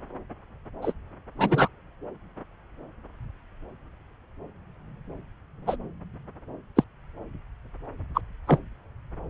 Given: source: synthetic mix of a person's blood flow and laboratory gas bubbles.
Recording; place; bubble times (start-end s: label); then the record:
Doppler ultrasound of blood flow; subclavian vein
0.82-0.93 s: bubbles
1.38-1.68 s: bubbles
5.67-5.76 s: bubbles
6.76-6.84 s: bubbles
8.14-8.21 s: bubbles
8.47-8.59 s: bubbles
From the record:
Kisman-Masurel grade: 123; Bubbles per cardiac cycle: 1 to 2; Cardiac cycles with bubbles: 10 to 50%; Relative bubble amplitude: loud (0.450 to 0.775); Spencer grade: 2 (many but less than half of the cardiac periods contain bubble signals, singularly or in groups); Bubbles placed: anywhere in the cardiac cycle